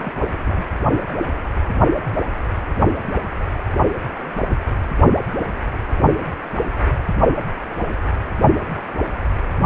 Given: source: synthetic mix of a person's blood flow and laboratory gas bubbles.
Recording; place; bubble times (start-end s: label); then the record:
Doppler ultrasound of blood flow; precordium
0.00-0.12 s: bubbles
0.16-0.38 s: bubbles
0.44-0.67 s: bubbles
From the record:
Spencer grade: 2 (many but less than half of the cardiac periods contain bubble signals, singularly or in groups); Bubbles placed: only in the low amplitude regions of the cardiac cycle